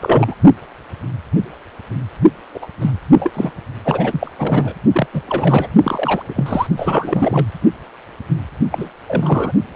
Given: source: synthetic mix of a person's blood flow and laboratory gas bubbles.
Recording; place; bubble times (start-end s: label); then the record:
Doppler ultrasound of blood flow; precordium
0.00-0.35 s: bubbles
2.54-2.65 s: bubbles
2.81-2.91 s: bubbles
3.14-3.53 s: bubbles
3.84-4.31 s: bubbles
4.38-4.74 s: bubbles
4.94-5.07 s: bubbles
5.13-5.21 s: bubbles
5.25-5.68 s: bubbles
5.83-6.23 s: bubbles
6.29-6.67 s: bubbles
6.76-7.46 s: bubbles
8.71-8.89 s: bubbles
9.08-9.52 s: bubbles
From the record:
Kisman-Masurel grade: 333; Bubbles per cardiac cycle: rolling drumbeat, 9 or more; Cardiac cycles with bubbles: 50 to 99%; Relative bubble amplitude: loud (0.450 to 0.775); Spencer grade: 3 (all of the cardiac periods contain showers or single bubble signals, but not dominating or overriding the cardiac motion signals); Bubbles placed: only in the low amplitude regions of the cardiac cycle